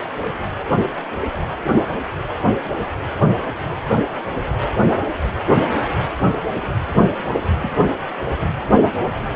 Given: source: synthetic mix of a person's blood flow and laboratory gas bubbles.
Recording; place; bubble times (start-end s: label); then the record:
Doppler ultrasound of blood flow; precordium
7.36-7.79 s: bubbles
From the record:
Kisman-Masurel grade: 111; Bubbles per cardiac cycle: 1 to 2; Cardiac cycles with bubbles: 1 to 10%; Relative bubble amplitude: barely perceptible (0.100 to 0.250); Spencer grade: 1 (occasional bubble signal discernible with the cardiac motion signal, with majority of cardiac periods free of bubbles); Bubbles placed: anywhere in the cardiac cycle